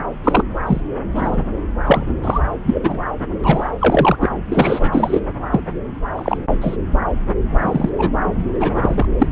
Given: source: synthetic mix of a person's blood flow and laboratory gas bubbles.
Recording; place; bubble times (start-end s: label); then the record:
Doppler ultrasound of blood flow; subclavian vein
0.00-0.03 s: bubbles
0.23-0.44 s: bubbles
0.67-0.80 s: bubbles
1.15-1.43 s: bubbles
1.84-2.12 s: bubbles
2.22-2.39 s: bubbles
2.63-3.00 s: bubbles
3.43-3.71 s: bubbles
3.79-4.17 s: bubbles
4.20-4.29 s: bubbles
4.48-5.20 s: bubbles
5.50-5.61 s: bubbles
6.15-6.37 s: bubbles
6.60-6.77 s: bubbles
7.60-7.90 s: bubbles
7.97-8.11 s: bubbles
8.24-8.45 s: bubbles
8.60-9.06 s: bubbles
9.18-9.27 s: bubbles
From the record:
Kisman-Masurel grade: 243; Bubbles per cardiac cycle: several, 3 to 8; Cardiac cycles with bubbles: 100%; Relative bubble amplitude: loud (0.450 to 0.775); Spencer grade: 3 (all of the cardiac periods contain showers or single bubble signals, but not dominating or overriding the cardiac motion signals); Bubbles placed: anywhere in the cardiac cycle